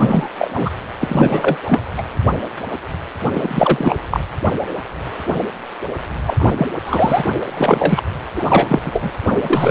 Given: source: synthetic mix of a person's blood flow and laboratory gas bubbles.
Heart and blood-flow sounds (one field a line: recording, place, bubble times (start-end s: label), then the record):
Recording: Doppler ultrasound of blood flow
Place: precordium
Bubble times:
0.00-0.29 s: bubbles
0.39-0.51 s: bubbles
0.54-0.70 s: bubbles
1.00-1.57 s: bubbles
1.65-1.81 s: bubbles
1.97-2.03 s: bubbles
3.33-3.96 s: bubbles
4.11-4.20 s: bubbles
6.25-6.67 s: bubbles
6.85-7.28 s: bubbles
7.48-8.03 s: bubbles
8.36-8.46 s: bubbles
8.48-8.80 s: bubbles
8.83-9.12 s: bubbles
9.24-9.71 s: bubbles
From the record:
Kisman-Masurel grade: 333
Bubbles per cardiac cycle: rolling drumbeat, 9 or more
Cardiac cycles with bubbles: 50 to 99%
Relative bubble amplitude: loud (0.450 to 0.775)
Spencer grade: 3 (all of the cardiac periods contain showers or single bubble signals, but not dominating or overriding the cardiac motion signals)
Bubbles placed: anywhere in the cardiac cycle